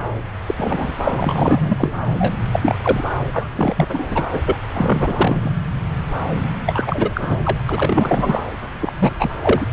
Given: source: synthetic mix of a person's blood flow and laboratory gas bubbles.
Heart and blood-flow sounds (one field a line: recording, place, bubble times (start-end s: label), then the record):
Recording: Doppler ultrasound of blood flow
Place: subclavian vein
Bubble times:
0.46-0.93 s: bubbles
1.04-1.92 s: bubbles
2.19-2.36 s: bubbles
2.51-2.59 s: bubbles
2.62-2.75 s: bubbles
2.82-3.04 s: bubbles
3.32-3.50 s: bubbles
3.55-4.26 s: bubbles
4.32-4.40 s: bubbles
4.44-4.57 s: bubbles
4.71-5.52 s: bubbles
6.66-7.38 s: bubbles
7.45-7.62 s: bubbles
7.68-8.45 s: bubbles
8.81-8.93 s: bubbles
8.99-9.12 s: bubbles
9.19-9.34 s: bubbles
9.42-9.67 s: bubbles
From the record:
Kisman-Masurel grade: 333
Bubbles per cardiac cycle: rolling drumbeat, 9 or more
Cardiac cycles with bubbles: 50 to 99%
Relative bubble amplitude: loud (0.450 to 0.775)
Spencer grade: 3 (all of the cardiac periods contain showers or single bubble signals, but not dominating or overriding the cardiac motion signals)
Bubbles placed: anywhere in the cardiac cycle